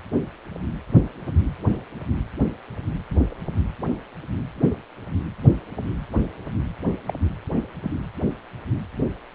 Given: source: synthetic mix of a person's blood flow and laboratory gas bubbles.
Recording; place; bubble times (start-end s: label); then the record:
Doppler ultrasound of blood flow; precordium
7.06-7.13 s: bubbles
7.83-7.91 s: bubbles
From the record:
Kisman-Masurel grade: 111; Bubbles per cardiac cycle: 1 to 2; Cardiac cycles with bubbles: 1 to 10%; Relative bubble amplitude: barely perceptible (0.100 to 0.250); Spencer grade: 1 (occasional bubble signal discernible with the cardiac motion signal, with majority of cardiac periods free of bubbles); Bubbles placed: anywhere in the cardiac cycle